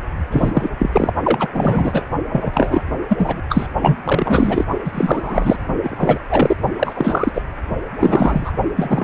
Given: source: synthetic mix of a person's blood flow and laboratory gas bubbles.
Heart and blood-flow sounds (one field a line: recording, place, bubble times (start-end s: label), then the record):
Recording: Doppler ultrasound of blood flow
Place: precordium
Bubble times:
0.31-0.70 s: bubbles
0.78-1.12 s: bubbles
1.24-1.48 s: bubbles
1.53-2.04 s: bubbles
2.29-2.83 s: bubbles
3.09-3.41 s: bubbles
3.49-3.67 s: bubbles
3.80-3.98 s: bubbles
4.04-4.65 s: bubbles
4.84-5.56 s: bubbles
5.83-6.21 s: bubbles
6.30-6.56 s: bubbles
6.79-7.42 s: bubbles
8.00-8.52 s: bubbles
8.76-9.04 s: bubbles
From the record:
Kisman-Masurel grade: 343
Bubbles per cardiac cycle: rolling drumbeat, 9 or more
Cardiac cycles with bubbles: 100%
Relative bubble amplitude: loud (0.450 to 0.775)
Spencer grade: 3 (all of the cardiac periods contain showers or single bubble signals, but not dominating or overriding the cardiac motion signals)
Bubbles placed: only in the low amplitude regions of the cardiac cycle